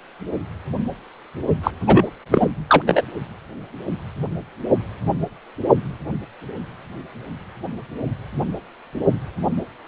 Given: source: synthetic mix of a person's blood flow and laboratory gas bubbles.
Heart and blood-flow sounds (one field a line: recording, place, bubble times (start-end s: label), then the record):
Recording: Doppler ultrasound of blood flow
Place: precordium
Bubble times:
1.63-1.71 s: bubbles
1.86-2.04 s: bubbles
2.31-2.48 s: bubbles
2.67-2.82 s: bubbles
2.86-3.02 s: bubbles
From the record:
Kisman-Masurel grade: 223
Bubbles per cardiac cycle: several, 3 to 8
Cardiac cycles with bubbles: 10 to 50%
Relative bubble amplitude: loud (0.450 to 0.775)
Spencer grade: 2 (many but less than half of the cardiac periods contain bubble signals, singularly or in groups)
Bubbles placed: only in the low amplitude regions of the cardiac cycle